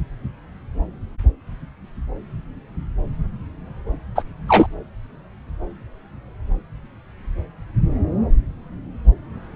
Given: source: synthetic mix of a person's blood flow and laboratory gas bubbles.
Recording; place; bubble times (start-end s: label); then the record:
Doppler ultrasound of blood flow; subclavian vein
4.15-4.23 s: bubbles
4.48-4.67 s: bubbles
From the record:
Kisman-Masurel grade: 223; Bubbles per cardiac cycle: several, 3 to 8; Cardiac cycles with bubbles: 10 to 50%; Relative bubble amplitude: loud (0.450 to 0.775); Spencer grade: 2 (many but less than half of the cardiac periods contain bubble signals, singularly or in groups); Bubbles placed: anywhere in the cardiac cycle